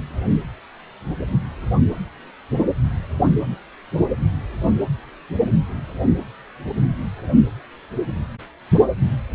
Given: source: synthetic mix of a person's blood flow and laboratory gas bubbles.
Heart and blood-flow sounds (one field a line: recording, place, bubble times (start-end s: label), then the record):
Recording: Doppler ultrasound of blood flow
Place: precordium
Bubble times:
no bubbles
From the record:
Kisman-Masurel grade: 000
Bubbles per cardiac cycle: 0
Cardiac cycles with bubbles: 0%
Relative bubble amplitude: no bubbles discernible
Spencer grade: 0 (complete lack of bubble signals)